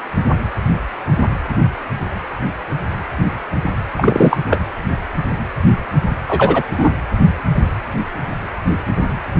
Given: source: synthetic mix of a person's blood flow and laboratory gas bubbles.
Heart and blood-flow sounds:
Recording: Doppler ultrasound of blood flow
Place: precordium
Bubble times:
3.98-4.37 s: bubbles
4.48-4.60 s: bubbles
6.28-6.63 s: bubbles
6.78-6.91 s: bubbles
From the record:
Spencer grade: 2 (many but less than half of the cardiac periods contain bubble signals, singularly or in groups)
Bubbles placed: anywhere in the cardiac cycle

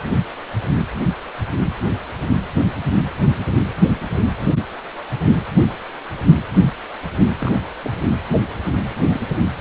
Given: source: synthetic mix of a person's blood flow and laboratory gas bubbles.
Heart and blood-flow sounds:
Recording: Doppler ultrasound of blood flow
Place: precordium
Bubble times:
7.38-7.61 s: bubbles
7.82-7.93 s: bubbles
8.88-9.21 s: bubbles
9.59-9.61 s: bubbles
From the record:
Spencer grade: 2 (many but less than half of the cardiac periods contain bubble signals, singularly or in groups)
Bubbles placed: anywhere in the cardiac cycle

